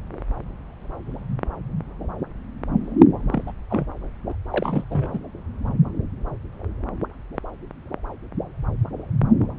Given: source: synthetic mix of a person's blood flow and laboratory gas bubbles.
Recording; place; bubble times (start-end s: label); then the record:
Doppler ultrasound of blood flow; subclavian vein
3.32-3.44 s: bubbles
3.47-3.52 s: bubbles
3.70-3.85 s: bubbles
4.29-4.33 s: bubbles
4.51-4.84 s: bubbles
4.91-5.20 s: bubbles
From the record:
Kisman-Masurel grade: 221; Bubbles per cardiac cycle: several, 3 to 8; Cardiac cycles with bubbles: 10 to 50%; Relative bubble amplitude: barely perceptible (0.100 to 0.250); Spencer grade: 2 (many but less than half of the cardiac periods contain bubble signals, singularly or in groups); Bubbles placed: anywhere in the cardiac cycle